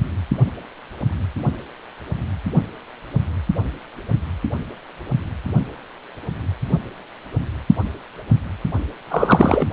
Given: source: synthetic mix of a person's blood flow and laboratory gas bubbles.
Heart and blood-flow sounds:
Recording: Doppler ultrasound of blood flow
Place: precordium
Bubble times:
9.11-9.65 s: bubbles
From the record:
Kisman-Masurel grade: 223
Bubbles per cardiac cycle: several, 3 to 8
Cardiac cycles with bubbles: 10 to 50%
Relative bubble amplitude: loud (0.450 to 0.775)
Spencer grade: 2 (many but less than half of the cardiac periods contain bubble signals, singularly or in groups)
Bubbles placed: only in the low amplitude regions of the cardiac cycle

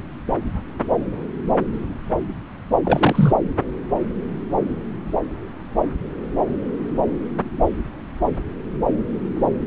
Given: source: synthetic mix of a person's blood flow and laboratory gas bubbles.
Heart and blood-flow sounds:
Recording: Doppler ultrasound of blood flow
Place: subclavian vein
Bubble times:
2.85-3.33 s: bubbles
From the record:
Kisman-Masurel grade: 212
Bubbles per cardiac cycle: several, 3 to 8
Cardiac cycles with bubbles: 1 to 10%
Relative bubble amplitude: moderate (0.250 to 0.450)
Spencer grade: 1 (occasional bubble signal discernible with the cardiac motion signal, with majority of cardiac periods free of bubbles)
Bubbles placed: anywhere in the cardiac cycle

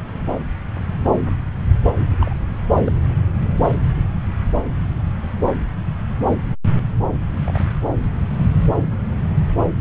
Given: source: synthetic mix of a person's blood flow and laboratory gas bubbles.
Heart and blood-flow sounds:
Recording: Doppler ultrasound of blood flow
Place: subclavian vein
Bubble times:
2.21-2.34 s: bubbles
2.85-2.92 s: bubbles
7.12-7.20 s: bubbles
7.45-7.70 s: bubbles
From the record:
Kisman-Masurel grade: 111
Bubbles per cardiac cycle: 1 to 2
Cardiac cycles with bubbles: 1 to 10%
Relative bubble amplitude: barely perceptible (0.100 to 0.250)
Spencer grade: 1 (occasional bubble signal discernible with the cardiac motion signal, with majority of cardiac periods free of bubbles)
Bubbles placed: anywhere in the cardiac cycle

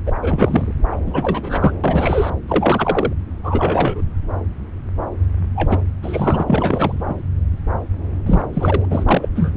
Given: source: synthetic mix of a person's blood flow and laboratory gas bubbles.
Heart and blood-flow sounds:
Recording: Doppler ultrasound of blood flow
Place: subclavian vein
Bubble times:
0.06-0.12 s: bubbles
0.22-0.74 s: bubbles
0.92-0.96 s: bubbles
1.06-1.72 s: bubbles
1.83-2.30 s: bubbles
2.48-3.13 s: bubbles
3.43-4.02 s: bubbles
5.54-5.79 s: bubbles
6.03-6.44 s: bubbles
6.48-7.15 s: bubbles
8.26-8.47 s: bubbles
8.54-8.85 s: bubbles
8.89-9.29 s: bubbles
9.35-9.50 s: bubbles
From the record:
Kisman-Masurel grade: 332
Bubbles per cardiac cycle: rolling drumbeat, 9 or more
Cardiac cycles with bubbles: 50 to 99%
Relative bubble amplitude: moderate (0.250 to 0.450)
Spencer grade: 3 (all of the cardiac periods contain showers or single bubble signals, but not dominating or overriding the cardiac motion signals)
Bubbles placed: anywhere in the cardiac cycle

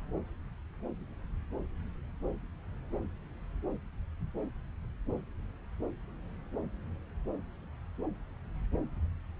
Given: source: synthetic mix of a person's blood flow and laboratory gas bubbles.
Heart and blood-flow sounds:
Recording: Doppler ultrasound of blood flow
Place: subclavian vein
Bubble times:
no bubbles
From the record:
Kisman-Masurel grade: 000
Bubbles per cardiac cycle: 0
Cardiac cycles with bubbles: 0%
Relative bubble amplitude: no bubbles discernible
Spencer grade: 0 (complete lack of bubble signals)

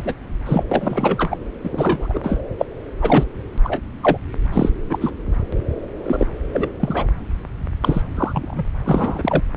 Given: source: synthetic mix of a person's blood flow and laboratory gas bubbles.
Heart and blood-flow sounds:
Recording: Doppler ultrasound of blood flow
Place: subclavian vein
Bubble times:
0.00-0.14 s: bubbles
0.46-0.64 s: bubbles
0.71-1.36 s: bubbles
1.64-2.19 s: bubbles
2.23-2.39 s: bubbles
2.58-2.66 s: bubbles
3.02-3.25 s: bubbles
3.64-3.81 s: bubbles
4.03-4.18 s: bubbles
4.53-4.70 s: bubbles
4.90-4.99 s: bubbles
5.01-5.11 s: bubbles
5.52-5.55 s: bubbles
6.03-6.26 s: bubbles
6.53-6.69 s: bubbles
6.79-7.09 s: bubbles
7.82-8.02 s: bubbles
8.15-8.64 s: bubbles
8.85-9.41 s: bubbles
From the record:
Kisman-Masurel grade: 242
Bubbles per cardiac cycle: several, 3 to 8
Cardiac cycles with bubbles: 100%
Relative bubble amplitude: moderate (0.250 to 0.450)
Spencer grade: 3 (all of the cardiac periods contain showers or single bubble signals, but not dominating or overriding the cardiac motion signals)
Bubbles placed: anywhere in the cardiac cycle

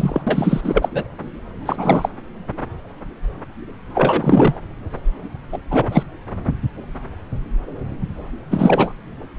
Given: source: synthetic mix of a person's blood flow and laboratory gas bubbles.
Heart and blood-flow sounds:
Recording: Doppler ultrasound of blood flow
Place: subclavian vein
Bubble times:
0.00-0.21 s: bubbles
0.27-0.90 s: bubbles
0.93-1.04 s: bubbles
1.66-2.12 s: bubbles
3.94-4.62 s: bubbles
5.52-5.58 s: bubbles
5.71-6.03 s: bubbles
8.50-8.92 s: bubbles
From the record:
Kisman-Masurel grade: 333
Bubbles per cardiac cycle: rolling drumbeat, 9 or more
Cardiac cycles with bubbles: 50 to 99%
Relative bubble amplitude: loud (0.450 to 0.775)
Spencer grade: 3 (all of the cardiac periods contain showers or single bubble signals, but not dominating or overriding the cardiac motion signals)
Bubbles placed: anywhere in the cardiac cycle

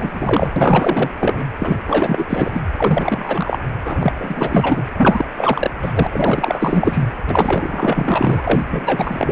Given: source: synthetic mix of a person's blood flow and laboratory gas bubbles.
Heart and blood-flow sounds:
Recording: Doppler ultrasound of blood flow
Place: precordium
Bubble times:
0.00-1.10 s: bubbles
1.20-1.45 s: bubbles
1.58-1.77 s: bubbles
1.87-2.61 s: bubbles
2.75-3.58 s: bubbles
3.84-4.12 s: bubbles
4.16-4.85 s: bubbles
4.96-5.25 s: bubbles
5.37-5.71 s: bubbles
5.81-6.07 s: bubbles
6.12-7.05 s: bubbles
7.27-8.42 s: bubbles
8.45-8.65 s: bubbles
8.71-9.32 s: bubbles
From the record:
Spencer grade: 4 (maximum detectable bubble signal sounding continuously throughout systole and diastole of every cardiac period, and overriding the amplitude of the normal cardiac signals)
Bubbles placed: anywhere in the cardiac cycle

